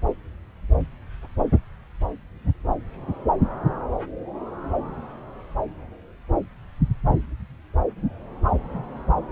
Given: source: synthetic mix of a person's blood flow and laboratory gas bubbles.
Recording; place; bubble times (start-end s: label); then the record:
Doppler ultrasound of blood flow; subclavian vein
no bubbles
From the record:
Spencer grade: 0 (complete lack of bubble signals)